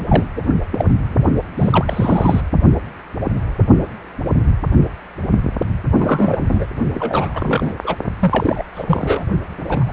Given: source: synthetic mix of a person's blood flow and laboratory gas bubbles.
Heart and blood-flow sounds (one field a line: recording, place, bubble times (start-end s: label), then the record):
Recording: Doppler ultrasound of blood flow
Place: precordium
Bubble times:
0.08-0.29 s: bubbles
0.35-0.42 s: bubbles
0.71-0.91 s: bubbles
1.57-2.41 s: bubbles
5.99-6.66 s: bubbles
6.93-7.74 s: bubbles
7.83-7.95 s: bubbles
8.19-8.63 s: bubbles
8.75-8.85 s: bubbles
8.87-9.26 s: bubbles
9.69-9.91 s: bubbles
From the record:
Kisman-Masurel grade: 232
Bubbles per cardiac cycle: several, 3 to 8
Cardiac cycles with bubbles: 50 to 99%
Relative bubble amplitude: moderate (0.250 to 0.450)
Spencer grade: 3 (all of the cardiac periods contain showers or single bubble signals, but not dominating or overriding the cardiac motion signals)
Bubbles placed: only in the low amplitude regions of the cardiac cycle